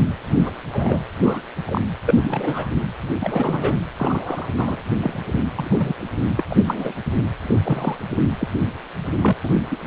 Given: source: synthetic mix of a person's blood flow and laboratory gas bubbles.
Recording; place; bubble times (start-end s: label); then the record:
Doppler ultrasound of blood flow; precordium
0.42-0.51 s: bubbles
0.72-1.00 s: bubbles
1.23-1.41 s: bubbles
1.66-1.81 s: bubbles
2.06-2.69 s: bubbles
3.20-3.76 s: bubbles
3.97-4.46 s: bubbles
4.56-4.82 s: bubbles
5.00-5.19 s: bubbles
5.55-5.93 s: bubbles
6.38-6.43 s: bubbles
6.50-6.94 s: bubbles
7.47-7.55 s: bubbles
7.64-7.97 s: bubbles
8.39-8.48 s: bubbles
9.21-9.33 s: bubbles
9.43-9.50 s: bubbles
9.54-9.60 s: bubbles
9.71-9.79 s: bubbles
From the record:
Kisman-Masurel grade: 232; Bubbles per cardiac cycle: several, 3 to 8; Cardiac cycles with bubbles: 50 to 99%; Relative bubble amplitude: moderate (0.250 to 0.450); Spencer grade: 3 (all of the cardiac periods contain showers or single bubble signals, but not dominating or overriding the cardiac motion signals); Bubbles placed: anywhere in the cardiac cycle